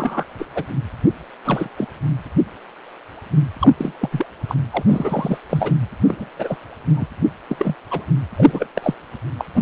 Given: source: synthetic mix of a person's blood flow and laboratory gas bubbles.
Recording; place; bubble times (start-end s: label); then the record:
Doppler ultrasound of blood flow; precordium
0.00-0.24 s: bubbles
0.38-0.46 s: bubbles
0.54-0.64 s: bubbles
1.44-1.69 s: bubbles
1.77-1.86 s: bubbles
3.60-3.74 s: bubbles
3.78-3.93 s: bubbles
4.00-4.09 s: bubbles
4.12-4.26 s: bubbles
4.48-4.56 s: bubbles
4.71-4.83 s: bubbles
4.86-5.38 s: bubbles
5.50-5.74 s: bubbles
6.04-6.29 s: bubbles
6.38-6.56 s: bubbles
6.96-7.06 s: bubbles
7.49-7.74 s: bubbles
7.90-8.05 s: bubbles
8.35-8.67 s: bubbles
8.75-8.95 s: bubbles
9.38-9.45 s: bubbles
9.54-9.62 s: bubbles
From the record:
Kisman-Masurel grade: 232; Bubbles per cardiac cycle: several, 3 to 8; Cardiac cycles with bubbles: 50 to 99%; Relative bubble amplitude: moderate (0.250 to 0.450); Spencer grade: 3 (all of the cardiac periods contain showers or single bubble signals, but not dominating or overriding the cardiac motion signals); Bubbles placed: anywhere in the cardiac cycle